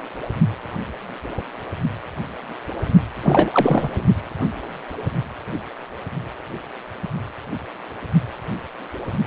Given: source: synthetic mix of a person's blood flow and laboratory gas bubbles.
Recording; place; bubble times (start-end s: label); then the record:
Doppler ultrasound of blood flow; precordium
3.23-3.50 s: bubbles
3.53-4.04 s: bubbles
From the record:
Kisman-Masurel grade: 223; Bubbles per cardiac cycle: several, 3 to 8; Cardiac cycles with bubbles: 10 to 50%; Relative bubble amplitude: loud (0.450 to 0.775); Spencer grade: 2 (many but less than half of the cardiac periods contain bubble signals, singularly or in groups); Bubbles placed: anywhere in the cardiac cycle